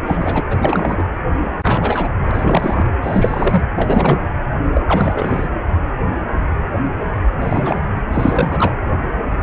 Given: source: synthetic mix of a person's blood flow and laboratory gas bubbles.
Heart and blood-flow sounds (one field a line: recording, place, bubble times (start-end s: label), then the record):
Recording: Doppler ultrasound of blood flow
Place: precordium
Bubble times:
0.05-0.41 s: bubbles
0.50-1.04 s: bubbles
1.63-2.09 s: bubbles
2.29-2.87 s: bubbles
3.02-3.64 s: bubbles
3.76-4.19 s: bubbles
4.73-4.81 s: bubbles
4.88-5.48 s: bubbles
7.40-7.83 s: bubbles
7.96-8.00 s: bubbles
8.12-8.76 s: bubbles
From the record:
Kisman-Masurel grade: 333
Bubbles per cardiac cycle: rolling drumbeat, 9 or more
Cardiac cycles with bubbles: 50 to 99%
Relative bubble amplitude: loud (0.450 to 0.775)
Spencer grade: 3 (all of the cardiac periods contain showers or single bubble signals, but not dominating or overriding the cardiac motion signals)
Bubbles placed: anywhere in the cardiac cycle